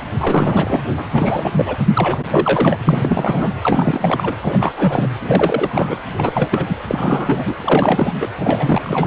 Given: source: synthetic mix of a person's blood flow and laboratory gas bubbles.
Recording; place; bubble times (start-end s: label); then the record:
Doppler ultrasound of blood flow; precordium
0.18-0.81 s: bubbles
0.98-1.04 s: bubbles
1.14-1.52 s: bubbles
1.57-1.76 s: bubbles
1.94-2.23 s: bubbles
2.30-2.79 s: bubbles
2.83-3.55 s: bubbles
3.62-4.36 s: bubbles
4.41-5.09 s: bubbles
5.24-6.03 s: bubbles
6.17-6.83 s: bubbles
6.87-7.56 s: bubbles
7.60-8.12 s: bubbles
8.19-8.28 s: bubbles
8.38-9.07 s: bubbles
From the record:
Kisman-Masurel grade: 343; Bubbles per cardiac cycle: rolling drumbeat, 9 or more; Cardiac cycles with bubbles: 100%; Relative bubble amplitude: loud (0.450 to 0.775); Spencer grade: 3 (all of the cardiac periods contain showers or single bubble signals, but not dominating or overriding the cardiac motion signals); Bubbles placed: anywhere in the cardiac cycle